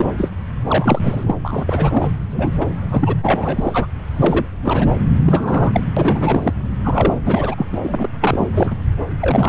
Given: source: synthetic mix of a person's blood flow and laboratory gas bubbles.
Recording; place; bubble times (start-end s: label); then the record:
Doppler ultrasound of blood flow; subclavian vein
0.00-0.31 s: bubbles
0.67-1.35 s: bubbles
1.45-2.12 s: bubbles
2.33-2.51 s: bubbles
2.60-2.67 s: bubbles
2.90-3.13 s: bubbles
3.22-3.87 s: bubbles
4.12-4.46 s: bubbles
4.62-4.88 s: bubbles
5.26-5.83 s: bubbles
5.96-6.52 s: bubbles
6.83-7.55 s: bubbles
7.58-7.67 s: bubbles
7.72-7.78 s: bubbles
7.84-8.09 s: bubbles
8.20-8.48 s: bubbles
8.55-8.76 s: bubbles
9.20-9.49 s: bubbles
From the record:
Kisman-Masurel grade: 333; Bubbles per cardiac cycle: rolling drumbeat, 9 or more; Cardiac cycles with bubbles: 50 to 99%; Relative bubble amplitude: loud (0.450 to 0.775); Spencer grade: 3 (all of the cardiac periods contain showers or single bubble signals, but not dominating or overriding the cardiac motion signals); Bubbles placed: anywhere in the cardiac cycle